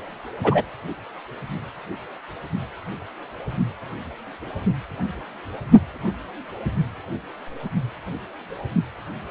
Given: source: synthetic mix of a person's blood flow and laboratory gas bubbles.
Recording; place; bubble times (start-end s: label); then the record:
Doppler ultrasound of blood flow; precordium
0.43-0.62 s: bubbles
From the record:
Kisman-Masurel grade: 113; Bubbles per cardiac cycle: 1 to 2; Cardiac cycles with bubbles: 1 to 10%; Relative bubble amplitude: loud (0.450 to 0.775); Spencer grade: 1 (occasional bubble signal discernible with the cardiac motion signal, with majority of cardiac periods free of bubbles); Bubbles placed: only in the low amplitude regions of the cardiac cycle